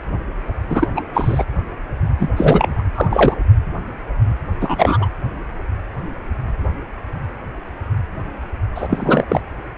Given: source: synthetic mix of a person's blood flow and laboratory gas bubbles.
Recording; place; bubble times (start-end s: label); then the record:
Doppler ultrasound of blood flow; precordium
0.69-0.88 s: bubbles
0.95-1.02 s: bubbles
1.14-1.44 s: bubbles
2.19-2.29 s: bubbles
2.37-2.83 s: bubbles
2.95-3.08 s: bubbles
3.10-3.37 s: bubbles
4.61-5.11 s: bubbles
8.75-9.24 s: bubbles
9.28-9.40 s: bubbles
From the record:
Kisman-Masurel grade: 223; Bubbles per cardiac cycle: several, 3 to 8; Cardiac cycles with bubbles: 10 to 50%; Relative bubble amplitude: loud (0.450 to 0.775); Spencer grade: 2 (many but less than half of the cardiac periods contain bubble signals, singularly or in groups); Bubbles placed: anywhere in the cardiac cycle